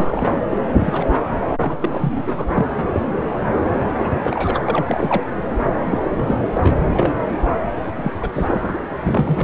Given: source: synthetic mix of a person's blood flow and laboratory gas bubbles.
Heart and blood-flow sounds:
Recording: Doppler ultrasound of blood flow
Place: subclavian vein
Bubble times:
0.00-0.29 s: bubbles
0.47-0.58 s: bubbles
0.79-1.04 s: bubbles
1.60-2.23 s: bubbles
2.25-2.65 s: bubbles
2.94-3.01 s: bubbles
3.25-3.50 s: bubbles
3.57-3.83 s: bubbles
3.99-4.11 s: bubbles
4.13-4.60 s: bubbles
4.67-5.24 s: bubbles
5.84-6.00 s: bubbles
6.04-6.75 s: bubbles
6.93-7.11 s: bubbles
7.83-8.12 s: bubbles
8.21-8.29 s: bubbles
8.33-8.85 s: bubbles
9.01-9.44 s: bubbles
From the record:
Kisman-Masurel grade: 233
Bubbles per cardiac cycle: several, 3 to 8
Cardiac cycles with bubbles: 50 to 99%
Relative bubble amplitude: loud (0.450 to 0.775)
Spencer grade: 3 (all of the cardiac periods contain showers or single bubble signals, but not dominating or overriding the cardiac motion signals)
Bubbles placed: anywhere in the cardiac cycle

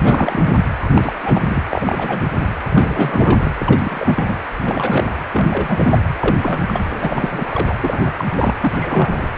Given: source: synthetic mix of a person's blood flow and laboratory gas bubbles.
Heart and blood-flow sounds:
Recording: Doppler ultrasound of blood flow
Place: precordium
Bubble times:
0.02-0.58 s: bubbles
0.80-0.87 s: bubbles
0.94-1.12 s: bubbles
1.21-1.64 s: bubbles
1.70-2.21 s: bubbles
2.39-2.49 s: bubbles
2.70-3.52 s: bubbles
3.59-4.39 s: bubbles
4.65-5.12 s: bubbles
5.31-5.47 s: bubbles
5.49-5.98 s: bubbles
6.19-6.36 s: bubbles
6.41-6.63 s: bubbles
6.67-6.85 s: bubbles
7.01-7.46 s: bubbles
7.51-7.73 s: bubbles
7.82-8.12 s: bubbles
8.18-8.25 s: bubbles
8.29-8.54 s: bubbles
8.61-9.28 s: bubbles
From the record:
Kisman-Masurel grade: 342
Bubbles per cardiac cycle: rolling drumbeat, 9 or more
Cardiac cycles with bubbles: 100%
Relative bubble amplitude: moderate (0.250 to 0.450)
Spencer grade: 3 (all of the cardiac periods contain showers or single bubble signals, but not dominating or overriding the cardiac motion signals)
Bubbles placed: anywhere in the cardiac cycle

